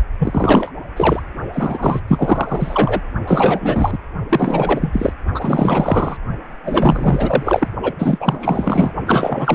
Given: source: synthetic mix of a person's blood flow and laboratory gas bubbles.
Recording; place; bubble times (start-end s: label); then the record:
Doppler ultrasound of blood flow; precordium
0.18-0.71 s: bubbles
0.96-1.23 s: bubbles
1.53-2.00 s: bubbles
2.07-3.01 s: bubbles
3.27-3.98 s: bubbles
4.29-5.12 s: bubbles
5.33-6.17 s: bubbles
6.63-7.68 s: bubbles
7.82-7.93 s: bubbles
7.98-8.92 s: bubbles
9.06-9.55 s: bubbles
From the record:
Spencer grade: 4 (maximum detectable bubble signal sounding continuously throughout systole and diastole of every cardiac period, and overriding the amplitude of the normal cardiac signals); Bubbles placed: only in the low amplitude regions of the cardiac cycle